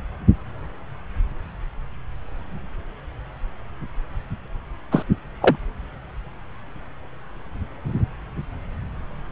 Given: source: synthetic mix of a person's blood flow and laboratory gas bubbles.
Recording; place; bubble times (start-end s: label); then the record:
Doppler ultrasound of blood flow; subclavian vein
4.91-5.03 s: bubbles
5.42-5.57 s: bubbles
From the record:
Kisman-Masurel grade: 113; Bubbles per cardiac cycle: 1 to 2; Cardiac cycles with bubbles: 1 to 10%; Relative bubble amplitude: loud (0.450 to 0.775); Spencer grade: 1 (occasional bubble signal discernible with the cardiac motion signal, with majority of cardiac periods free of bubbles); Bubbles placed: anywhere in the cardiac cycle